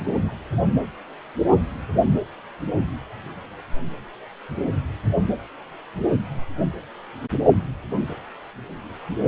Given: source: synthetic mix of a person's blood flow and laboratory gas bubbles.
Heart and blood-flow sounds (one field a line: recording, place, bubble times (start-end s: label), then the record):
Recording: Doppler ultrasound of blood flow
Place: precordium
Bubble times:
0.04-0.33 s: bubbles
From the record:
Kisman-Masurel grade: 121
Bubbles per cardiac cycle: 1 to 2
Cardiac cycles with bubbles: 10 to 50%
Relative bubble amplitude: barely perceptible (0.100 to 0.250)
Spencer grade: 2 (many but less than half of the cardiac periods contain bubble signals, singularly or in groups)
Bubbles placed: anywhere in the cardiac cycle